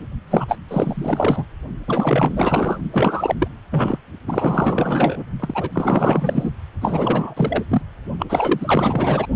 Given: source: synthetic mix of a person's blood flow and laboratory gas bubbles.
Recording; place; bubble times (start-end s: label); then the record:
Doppler ultrasound of blood flow; precordium
0.00-0.07 s: bubbles
0.30-0.58 s: bubbles
0.68-1.45 s: bubbles
1.87-2.78 s: bubbles
2.92-3.35 s: bubbles
3.39-3.48 s: bubbles
3.70-3.98 s: bubbles
4.27-5.25 s: bubbles
5.40-5.70 s: bubbles
5.72-6.51 s: bubbles
6.81-7.64 s: bubbles
7.69-7.81 s: bubbles
8.19-8.27 s: bubbles
8.29-9.27 s: bubbles
From the record:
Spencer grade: 4 (maximum detectable bubble signal sounding continuously throughout systole and diastole of every cardiac period, and overriding the amplitude of the normal cardiac signals); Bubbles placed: only in the low amplitude regions of the cardiac cycle